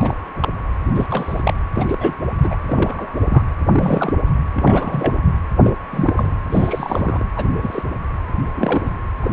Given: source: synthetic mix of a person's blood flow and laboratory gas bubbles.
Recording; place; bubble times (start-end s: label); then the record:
Doppler ultrasound of blood flow; precordium
0.00-0.15 s: bubbles
0.42-0.48 s: bubbles
0.95-1.06 s: bubbles
1.10-1.54 s: bubbles
1.75-2.14 s: bubbles
2.40-2.55 s: bubbles
2.67-3.19 s: bubbles
3.21-3.42 s: bubbles
3.66-4.13 s: bubbles
4.54-5.13 s: bubbles
5.60-5.72 s: bubbles
5.91-6.33 s: bubbles
6.50-7.24 s: bubbles
7.35-7.46 s: bubbles
7.61-7.83 s: bubbles
8.55-8.90 s: bubbles
9.22-9.31 s: bubbles
From the record:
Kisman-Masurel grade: 242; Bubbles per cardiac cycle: several, 3 to 8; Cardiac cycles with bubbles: 100%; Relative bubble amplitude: moderate (0.250 to 0.450); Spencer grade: 3 (all of the cardiac periods contain showers or single bubble signals, but not dominating or overriding the cardiac motion signals); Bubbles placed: anywhere in the cardiac cycle